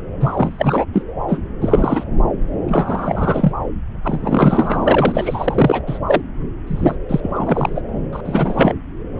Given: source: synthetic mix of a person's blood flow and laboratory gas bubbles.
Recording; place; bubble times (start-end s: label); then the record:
Doppler ultrasound of blood flow; subclavian vein
0.21-0.85 s: bubbles
0.94-1.02 s: bubbles
1.28-1.40 s: bubbles
1.61-2.03 s: bubbles
2.68-3.52 s: bubbles
4.04-5.83 s: bubbles
5.87-5.99 s: bubbles
6.06-6.21 s: bubbles
6.67-6.96 s: bubbles
7.09-7.81 s: bubbles
8.12-8.21 s: bubbles
8.24-8.75 s: bubbles
9.18-9.20 s: bubbles
From the record:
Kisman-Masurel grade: 343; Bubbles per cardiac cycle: rolling drumbeat, 9 or more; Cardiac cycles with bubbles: 100%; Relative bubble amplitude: loud (0.450 to 0.775); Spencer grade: 3 (all of the cardiac periods contain showers or single bubble signals, but not dominating or overriding the cardiac motion signals); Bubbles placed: anywhere in the cardiac cycle